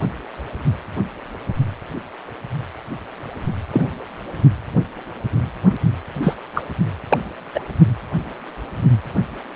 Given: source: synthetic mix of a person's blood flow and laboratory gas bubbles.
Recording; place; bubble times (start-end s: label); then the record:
Doppler ultrasound of blood flow; precordium
3.72-3.91 s: bubbles
6.21-6.36 s: bubbles
6.54-6.63 s: bubbles
7.09-7.19 s: bubbles
7.54-7.64 s: bubbles
From the record:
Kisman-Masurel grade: 123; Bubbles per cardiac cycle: 1 to 2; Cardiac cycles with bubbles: 10 to 50%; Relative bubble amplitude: loud (0.450 to 0.775); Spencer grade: 2 (many but less than half of the cardiac periods contain bubble signals, singularly or in groups); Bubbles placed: only in the low amplitude regions of the cardiac cycle